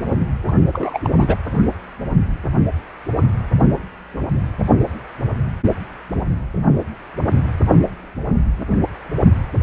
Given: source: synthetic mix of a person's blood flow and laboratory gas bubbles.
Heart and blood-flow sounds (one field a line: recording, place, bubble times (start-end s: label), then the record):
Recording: Doppler ultrasound of blood flow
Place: precordium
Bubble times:
0.48-0.52 s: bubbles
0.73-0.99 s: bubbles
1.04-1.09 s: bubbles
1.18-1.35 s: bubbles
From the record:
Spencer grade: 1 (occasional bubble signal discernible with the cardiac motion signal, with majority of cardiac periods free of bubbles)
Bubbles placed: anywhere in the cardiac cycle